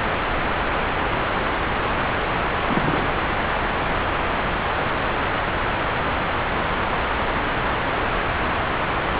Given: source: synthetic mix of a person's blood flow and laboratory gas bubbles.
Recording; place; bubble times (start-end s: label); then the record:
Doppler ultrasound of blood flow; subclavian vein
2.68-3.14 s: bubbles
From the record:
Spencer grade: 2 (many but less than half of the cardiac periods contain bubble signals, singularly or in groups); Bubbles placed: anywhere in the cardiac cycle